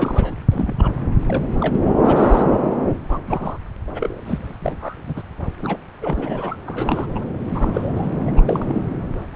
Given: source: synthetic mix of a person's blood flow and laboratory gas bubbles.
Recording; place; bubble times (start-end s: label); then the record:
Doppler ultrasound of blood flow; subclavian vein
0.00-0.35 s: bubbles
0.51-0.73 s: bubbles
0.78-0.92 s: bubbles
1.27-1.46 s: bubbles
1.60-1.80 s: bubbles
2.04-2.55 s: bubbles
3.09-3.18 s: bubbles
3.28-3.57 s: bubbles
3.87-4.21 s: bubbles
4.25-4.54 s: bubbles
4.62-4.96 s: bubbles
5.04-5.23 s: bubbles
5.62-5.77 s: bubbles
6.01-6.57 s: bubbles
6.67-7.26 s: bubbles
7.46-8.10 s: bubbles
8.27-8.31 s: bubbles
8.36-8.41 s: bubbles
8.46-8.82 s: bubbles
9.33-9.36 s: bubbles
From the record:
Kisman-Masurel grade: 242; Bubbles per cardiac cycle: several, 3 to 8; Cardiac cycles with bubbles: 100%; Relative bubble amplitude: moderate (0.250 to 0.450); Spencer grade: 3 (all of the cardiac periods contain showers or single bubble signals, but not dominating or overriding the cardiac motion signals); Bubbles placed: anywhere in the cardiac cycle